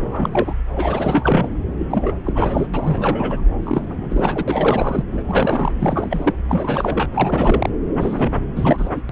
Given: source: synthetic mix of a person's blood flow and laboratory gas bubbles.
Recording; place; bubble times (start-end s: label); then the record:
Doppler ultrasound of blood flow; subclavian vein
0.01-0.61 s: bubbles
0.77-1.48 s: bubbles
1.78-2.13 s: bubbles
2.24-2.67 s: bubbles
2.73-3.42 s: bubbles
3.63-4.45 s: bubbles
4.47-5.04 s: bubbles
5.12-5.22 s: bubbles
5.26-5.72 s: bubbles
5.79-6.33 s: bubbles
6.48-7.09 s: bubbles
7.14-7.70 s: bubbles
7.99-8.31 s: bubbles
8.55-8.89 s: bubbles
8.95-9.01 s: bubbles
9.09-9.12 s: bubbles
From the record:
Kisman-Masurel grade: 343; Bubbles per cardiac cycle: rolling drumbeat, 9 or more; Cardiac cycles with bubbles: 100%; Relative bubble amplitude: loud (0.450 to 0.775); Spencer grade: 3 (all of the cardiac periods contain showers or single bubble signals, but not dominating or overriding the cardiac motion signals); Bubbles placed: anywhere in the cardiac cycle